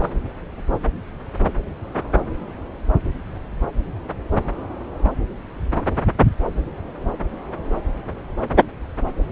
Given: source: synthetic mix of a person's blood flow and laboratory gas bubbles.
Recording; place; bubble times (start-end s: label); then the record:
Doppler ultrasound of blood flow; subclavian vein
0.02-0.10 s: bubbles
From the record:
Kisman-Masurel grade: 121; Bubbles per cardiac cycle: 1 to 2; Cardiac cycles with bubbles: 10 to 50%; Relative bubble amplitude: barely perceptible (0.100 to 0.250); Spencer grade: 2 (many but less than half of the cardiac periods contain bubble signals, singularly or in groups); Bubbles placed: anywhere in the cardiac cycle